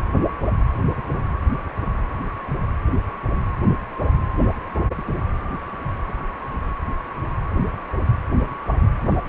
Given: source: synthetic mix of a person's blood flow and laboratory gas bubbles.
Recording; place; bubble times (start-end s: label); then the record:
Doppler ultrasound of blood flow; precordium
no bubbles
From the record:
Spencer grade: 0 (complete lack of bubble signals)